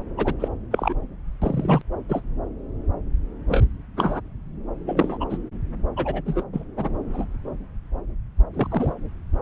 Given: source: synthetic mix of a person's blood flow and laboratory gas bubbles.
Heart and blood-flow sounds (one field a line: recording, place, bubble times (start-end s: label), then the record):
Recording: Doppler ultrasound of blood flow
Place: subclavian vein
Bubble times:
0.17-0.34 s: bubbles
0.39-0.48 s: bubbles
0.71-0.95 s: bubbles
1.42-1.82 s: bubbles
2.08-2.22 s: bubbles
3.47-3.64 s: bubbles
3.96-4.21 s: bubbles
4.85-5.17 s: bubbles
5.20-5.26 s: bubbles
5.29-5.38 s: bubbles
5.96-6.21 s: bubbles
6.25-6.43 s: bubbles
6.52-6.64 s: bubbles
6.77-6.90 s: bubbles
7.13-7.25 s: bubbles
8.54-8.68 s: bubbles
8.70-8.94 s: bubbles
From the record:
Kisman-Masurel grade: 233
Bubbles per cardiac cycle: several, 3 to 8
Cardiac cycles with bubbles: 50 to 99%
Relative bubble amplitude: loud (0.450 to 0.775)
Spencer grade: 3 (all of the cardiac periods contain showers or single bubble signals, but not dominating or overriding the cardiac motion signals)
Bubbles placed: anywhere in the cardiac cycle